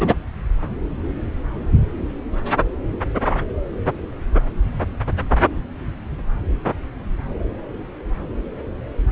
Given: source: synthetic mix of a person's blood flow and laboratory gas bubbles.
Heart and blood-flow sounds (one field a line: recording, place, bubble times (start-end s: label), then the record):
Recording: Doppler ultrasound of blood flow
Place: subclavian vein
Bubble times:
0.00-0.15 s: bubbles
From the record:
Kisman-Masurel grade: 113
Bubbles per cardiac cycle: 1 to 2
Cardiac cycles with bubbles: 1 to 10%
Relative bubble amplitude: loud (0.450 to 0.775)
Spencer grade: 1 (occasional bubble signal discernible with the cardiac motion signal, with majority of cardiac periods free of bubbles)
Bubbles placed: anywhere in the cardiac cycle